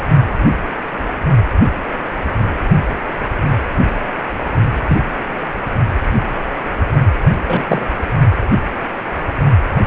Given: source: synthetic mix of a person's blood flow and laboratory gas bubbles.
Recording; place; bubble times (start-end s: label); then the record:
Doppler ultrasound of blood flow; precordium
4.88-4.98 s: bubbles
7.46-7.88 s: bubbles
From the record:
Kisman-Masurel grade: 123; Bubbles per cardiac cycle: 1 to 2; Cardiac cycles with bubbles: 10 to 50%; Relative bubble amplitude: loud (0.450 to 0.775); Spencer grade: 2 (many but less than half of the cardiac periods contain bubble signals, singularly or in groups); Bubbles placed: only in the low amplitude regions of the cardiac cycle